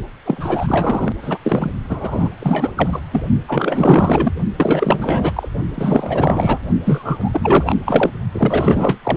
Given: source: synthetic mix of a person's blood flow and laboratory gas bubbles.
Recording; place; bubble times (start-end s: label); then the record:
Doppler ultrasound of blood flow; precordium
0.26-1.12 s: bubbles
1.22-1.39 s: bubbles
1.44-1.71 s: bubbles
1.89-2.29 s: bubbles
2.40-2.72 s: bubbles
2.75-3.01 s: bubbles
3.12-3.22 s: bubbles
3.47-4.33 s: bubbles
4.56-5.48 s: bubbles
5.74-6.58 s: bubbles
6.84-7.78 s: bubbles
7.86-8.10 s: bubbles
8.32-8.98 s: bubbles
9.03-9.17 s: bubbles
From the record:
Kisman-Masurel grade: 444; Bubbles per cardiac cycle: continuous sound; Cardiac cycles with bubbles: 100%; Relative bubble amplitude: maximal (0.775 to 0.999); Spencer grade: 4 (maximum detectable bubble signal sounding continuously throughout systole and diastole of every cardiac period, and overriding the amplitude of the normal cardiac signals); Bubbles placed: only in the low amplitude regions of the cardiac cycle